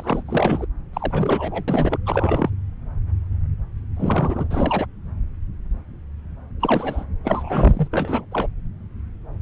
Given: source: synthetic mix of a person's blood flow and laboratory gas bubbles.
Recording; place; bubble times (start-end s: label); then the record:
Doppler ultrasound of blood flow; subclavian vein
0.00-0.23 s: bubbles
0.26-0.66 s: bubbles
0.93-1.63 s: bubbles
1.68-1.98 s: bubbles
2.06-2.50 s: bubbles
3.96-4.48 s: bubbles
4.50-4.86 s: bubbles
6.59-7.04 s: bubbles
7.24-7.88 s: bubbles
7.91-8.25 s: bubbles
8.31-8.46 s: bubbles
From the record:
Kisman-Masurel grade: 332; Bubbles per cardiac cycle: rolling drumbeat, 9 or more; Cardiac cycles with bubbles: 50 to 99%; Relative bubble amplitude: moderate (0.250 to 0.450); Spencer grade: 3 (all of the cardiac periods contain showers or single bubble signals, but not dominating or overriding the cardiac motion signals); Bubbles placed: anywhere in the cardiac cycle